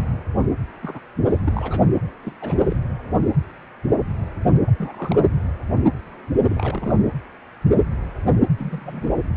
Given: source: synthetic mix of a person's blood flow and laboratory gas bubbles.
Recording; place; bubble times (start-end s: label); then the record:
Doppler ultrasound of blood flow; precordium
0.83-1.00 s: bubbles
1.26-1.39 s: bubbles
1.44-1.52 s: bubbles
1.55-1.86 s: bubbles
2.23-2.33 s: bubbles
2.41-2.60 s: bubbles
2.65-2.76 s: bubbles
4.67-4.71 s: bubbles
4.79-5.25 s: bubbles
6.48-6.95 s: bubbles
6.98-7.06 s: bubbles
8.58-9.12 s: bubbles
From the record:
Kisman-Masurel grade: 221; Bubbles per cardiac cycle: several, 3 to 8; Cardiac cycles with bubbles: 10 to 50%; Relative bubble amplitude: barely perceptible (0.100 to 0.250); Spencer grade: 2 (many but less than half of the cardiac periods contain bubble signals, singularly or in groups); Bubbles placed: anywhere in the cardiac cycle